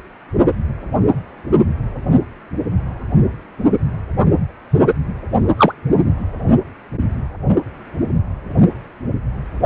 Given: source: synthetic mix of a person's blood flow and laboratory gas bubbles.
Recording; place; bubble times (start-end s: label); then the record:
Doppler ultrasound of blood flow; precordium
5.57-5.72 s: bubbles
From the record:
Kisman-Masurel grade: 113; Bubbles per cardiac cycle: 1 to 2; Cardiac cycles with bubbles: 1 to 10%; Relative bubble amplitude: loud (0.450 to 0.775); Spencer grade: 1 (occasional bubble signal discernible with the cardiac motion signal, with majority of cardiac periods free of bubbles); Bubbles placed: only in the low amplitude regions of the cardiac cycle